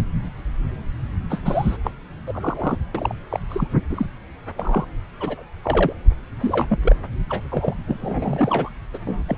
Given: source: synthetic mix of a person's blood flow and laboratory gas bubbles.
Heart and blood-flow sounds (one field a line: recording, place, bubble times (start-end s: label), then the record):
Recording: Doppler ultrasound of blood flow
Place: subclavian vein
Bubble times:
1.29-1.42 s: bubbles
1.44-1.77 s: bubbles
1.83-1.91 s: bubbles
2.27-2.77 s: bubbles
2.94-3.15 s: bubbles
3.29-3.40 s: bubbles
3.48-3.67 s: bubbles
3.90-4.06 s: bubbles
4.58-4.86 s: bubbles
5.20-5.43 s: bubbles
5.63-5.93 s: bubbles
6.40-6.79 s: bubbles
6.83-6.96 s: bubbles
7.29-7.42 s: bubbles
7.50-7.75 s: bubbles
7.87-8.70 s: bubbles
8.93-8.98 s: bubbles
9.06-9.23 s: bubbles
9.28-9.38 s: bubbles
From the record:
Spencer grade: 3 (all of the cardiac periods contain showers or single bubble signals, but not dominating or overriding the cardiac motion signals)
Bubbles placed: anywhere in the cardiac cycle